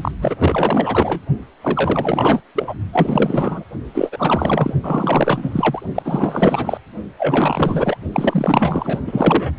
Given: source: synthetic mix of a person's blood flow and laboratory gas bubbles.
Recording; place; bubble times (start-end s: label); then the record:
Doppler ultrasound of blood flow; precordium
0.00-0.11 s: bubbles
0.21-1.21 s: bubbles
1.61-2.41 s: bubbles
2.55-2.74 s: bubbles
2.93-3.65 s: bubbles
3.94-4.74 s: bubbles
4.83-5.82 s: bubbles
5.95-6.78 s: bubbles
7.18-7.98 s: bubbles
8.12-8.99 s: bubbles
9.07-9.55 s: bubbles
From the record:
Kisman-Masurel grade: 444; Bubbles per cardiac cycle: continuous sound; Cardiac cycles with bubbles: 100%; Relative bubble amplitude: maximal (0.775 to 0.999); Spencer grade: 4 (maximum detectable bubble signal sounding continuously throughout systole and diastole of every cardiac period, and overriding the amplitude of the normal cardiac signals); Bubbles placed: only in the low amplitude regions of the cardiac cycle